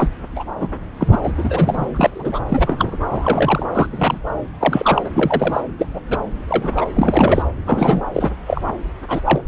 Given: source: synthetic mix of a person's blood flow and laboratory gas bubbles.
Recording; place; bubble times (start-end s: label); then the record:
Doppler ultrasound of blood flow; subclavian vein
0.00-0.10 s: bubbles
0.36-0.44 s: bubbles
0.60-0.68 s: bubbles
1.00-1.08 s: bubbles
1.11-1.18 s: bubbles
1.23-1.32 s: bubbles
1.38-1.87 s: bubbles
1.94-2.40 s: bubbles
2.48-2.98 s: bubbles
3.08-3.67 s: bubbles
3.74-3.86 s: bubbles
3.91-4.19 s: bubbles
4.60-5.10 s: bubbles
5.14-5.61 s: bubbles
5.79-5.88 s: bubbles
5.94-6.01 s: bubbles
6.10-6.18 s: bubbles
6.49-6.86 s: bubbles
6.96-7.43 s: bubbles
7.66-8.02 s: bubbles
8.13-8.29 s: bubbles
8.46-8.61 s: bubbles
9.08-9.21 s: bubbles
9.25-9.41 s: bubbles
From the record:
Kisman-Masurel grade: 243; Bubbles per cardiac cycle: several, 3 to 8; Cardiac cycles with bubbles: 100%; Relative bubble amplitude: loud (0.450 to 0.775); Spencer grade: 3 (all of the cardiac periods contain showers or single bubble signals, but not dominating or overriding the cardiac motion signals); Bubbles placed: anywhere in the cardiac cycle